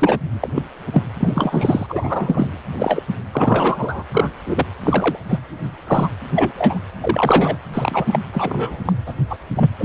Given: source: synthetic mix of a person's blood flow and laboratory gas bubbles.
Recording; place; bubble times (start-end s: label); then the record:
Doppler ultrasound of blood flow; precordium
0.00-0.19 s: bubbles
0.40-0.49 s: bubbles
0.56-0.62 s: bubbles
0.93-1.02 s: bubbles
1.20-2.50 s: bubbles
2.78-3.03 s: bubbles
3.32-4.03 s: bubbles
4.12-4.30 s: bubbles
4.46-4.66 s: bubbles
4.83-5.17 s: bubbles
5.29-5.38 s: bubbles
5.87-6.10 s: bubbles
6.34-6.52 s: bubbles
6.55-6.79 s: bubbles
7.00-7.56 s: bubbles
7.74-8.20 s: bubbles
8.33-8.79 s: bubbles
8.85-8.93 s: bubbles
9.06-9.14 s: bubbles
9.29-9.38 s: bubbles
9.56-9.70 s: bubbles
9.79-9.85 s: bubbles
From the record:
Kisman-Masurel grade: 243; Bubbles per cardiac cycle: several, 3 to 8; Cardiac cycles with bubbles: 100%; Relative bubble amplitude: loud (0.450 to 0.775); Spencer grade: 3 (all of the cardiac periods contain showers or single bubble signals, but not dominating or overriding the cardiac motion signals); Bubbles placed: anywhere in the cardiac cycle